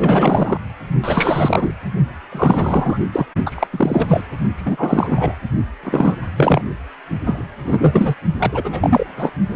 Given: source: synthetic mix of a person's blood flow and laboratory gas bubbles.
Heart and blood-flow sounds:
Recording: Doppler ultrasound of blood flow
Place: precordium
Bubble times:
0.00-0.58 s: bubbles
1.03-1.73 s: bubbles
2.32-3.00 s: bubbles
3.12-3.26 s: bubbles
3.43-3.67 s: bubbles
3.71-4.21 s: bubbles
4.56-5.35 s: bubbles
5.83-6.16 s: bubbles
6.36-6.62 s: bubbles
7.25-7.44 s: bubbles
7.63-8.15 s: bubbles
8.39-9.05 s: bubbles
9.16-9.30 s: bubbles
From the record:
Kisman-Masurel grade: 343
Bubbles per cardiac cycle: rolling drumbeat, 9 or more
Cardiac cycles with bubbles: 100%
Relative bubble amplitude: loud (0.450 to 0.775)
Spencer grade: 3 (all of the cardiac periods contain showers or single bubble signals, but not dominating or overriding the cardiac motion signals)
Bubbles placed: only in the low amplitude regions of the cardiac cycle

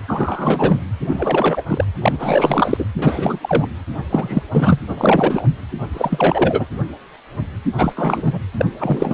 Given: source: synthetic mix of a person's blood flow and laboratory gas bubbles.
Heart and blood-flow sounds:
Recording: Doppler ultrasound of blood flow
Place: precordium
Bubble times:
0.07-0.81 s: bubbles
1.07-1.62 s: bubbles
1.68-1.85 s: bubbles
2.02-2.85 s: bubbles
2.98-3.39 s: bubbles
3.42-3.68 s: bubbles
4.10-4.42 s: bubbles
4.51-4.79 s: bubbles
4.89-4.95 s: bubbles
4.98-5.46 s: bubbles
5.93-6.66 s: bubbles
7.77-7.93 s: bubbles
7.96-8.39 s: bubbles
8.57-8.65 s: bubbles
8.79-9.14 s: bubbles
From the record:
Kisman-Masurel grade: 333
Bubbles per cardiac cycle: rolling drumbeat, 9 or more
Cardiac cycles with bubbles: 50 to 99%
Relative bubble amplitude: loud (0.450 to 0.775)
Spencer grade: 3 (all of the cardiac periods contain showers or single bubble signals, but not dominating or overriding the cardiac motion signals)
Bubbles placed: anywhere in the cardiac cycle

